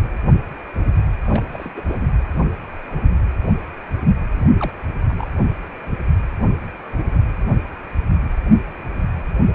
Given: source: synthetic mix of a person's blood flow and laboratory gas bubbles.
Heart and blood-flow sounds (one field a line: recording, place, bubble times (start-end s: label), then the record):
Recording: Doppler ultrasound of blood flow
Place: precordium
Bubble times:
1.23-1.42 s: bubbles
1.52-1.73 s: bubbles
1.77-1.81 s: bubbles
1.87-2.07 s: bubbles
4.36-4.41 s: bubbles
4.58-4.72 s: bubbles
5.08-5.25 s: bubbles
From the record:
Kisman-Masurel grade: 221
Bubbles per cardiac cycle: several, 3 to 8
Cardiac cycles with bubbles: 10 to 50%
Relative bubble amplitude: barely perceptible (0.100 to 0.250)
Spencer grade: 2 (many but less than half of the cardiac periods contain bubble signals, singularly or in groups)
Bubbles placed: anywhere in the cardiac cycle